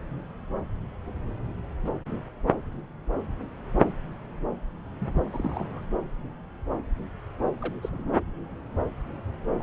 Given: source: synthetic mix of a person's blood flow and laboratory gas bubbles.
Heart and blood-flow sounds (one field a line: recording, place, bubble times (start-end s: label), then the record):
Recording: Doppler ultrasound of blood flow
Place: subclavian vein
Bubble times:
5.00-5.81 s: bubbles
7.58-7.74 s: bubbles
7.83-8.16 s: bubbles
9.59-9.63 s: bubbles
From the record:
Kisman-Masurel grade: 221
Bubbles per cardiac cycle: several, 3 to 8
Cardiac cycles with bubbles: 10 to 50%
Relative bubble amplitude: barely perceptible (0.100 to 0.250)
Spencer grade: 2 (many but less than half of the cardiac periods contain bubble signals, singularly or in groups)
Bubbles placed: anywhere in the cardiac cycle